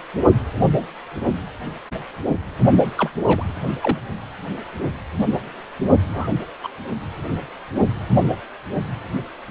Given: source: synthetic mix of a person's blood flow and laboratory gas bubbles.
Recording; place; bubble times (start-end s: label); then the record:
Doppler ultrasound of blood flow; precordium
2.98-3.11 s: bubbles
3.26-3.44 s: bubbles
3.81-3.99 s: bubbles
6.12-6.29 s: bubbles
6.62-6.68 s: bubbles
From the record:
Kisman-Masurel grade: 122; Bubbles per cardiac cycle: 1 to 2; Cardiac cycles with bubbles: 10 to 50%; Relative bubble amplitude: moderate (0.250 to 0.450); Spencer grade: 2 (many but less than half of the cardiac periods contain bubble signals, singularly or in groups); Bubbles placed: only in the low amplitude regions of the cardiac cycle